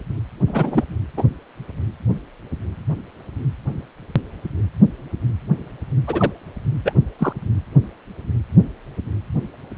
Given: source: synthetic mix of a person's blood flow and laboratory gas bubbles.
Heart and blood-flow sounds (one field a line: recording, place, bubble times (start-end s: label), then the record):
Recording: Doppler ultrasound of blood flow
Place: precordium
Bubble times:
0.47-0.84 s: bubbles
1.17-1.23 s: bubbles
6.07-6.32 s: bubbles
6.85-6.93 s: bubbles
7.19-7.33 s: bubbles
From the record:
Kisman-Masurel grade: 123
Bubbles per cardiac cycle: 1 to 2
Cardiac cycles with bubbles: 10 to 50%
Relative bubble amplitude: loud (0.450 to 0.775)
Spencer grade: 2 (many but less than half of the cardiac periods contain bubble signals, singularly or in groups)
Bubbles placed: anywhere in the cardiac cycle